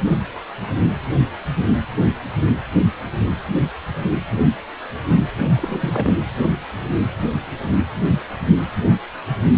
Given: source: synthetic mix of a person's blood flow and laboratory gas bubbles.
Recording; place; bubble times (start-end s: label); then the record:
Doppler ultrasound of blood flow; precordium
5.39-5.50 s: bubbles
5.57-6.14 s: bubbles
From the record:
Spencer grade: 1 (occasional bubble signal discernible with the cardiac motion signal, with majority of cardiac periods free of bubbles); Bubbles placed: anywhere in the cardiac cycle